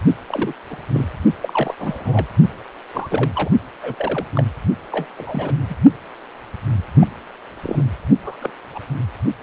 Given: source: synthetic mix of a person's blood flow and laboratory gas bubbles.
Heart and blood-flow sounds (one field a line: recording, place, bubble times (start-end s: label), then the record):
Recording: Doppler ultrasound of blood flow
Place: precordium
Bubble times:
0.28-0.53 s: bubbles
0.69-0.76 s: bubbles
0.88-1.03 s: bubbles
1.41-1.74 s: bubbles
1.79-2.26 s: bubbles
2.93-3.31 s: bubbles
3.35-3.49 s: bubbles
3.83-3.95 s: bubbles
3.98-4.26 s: bubbles
4.33-4.44 s: bubbles
4.92-5.06 s: bubbles
5.17-5.54 s: bubbles
5.70-5.75 s: bubbles
6.99-7.07 s: bubbles
7.62-7.83 s: bubbles
8.25-8.35 s: bubbles
8.40-8.50 s: bubbles
8.74-8.79 s: bubbles
From the record:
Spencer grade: 3 (all of the cardiac periods contain showers or single bubble signals, but not dominating or overriding the cardiac motion signals)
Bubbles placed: only in the low amplitude regions of the cardiac cycle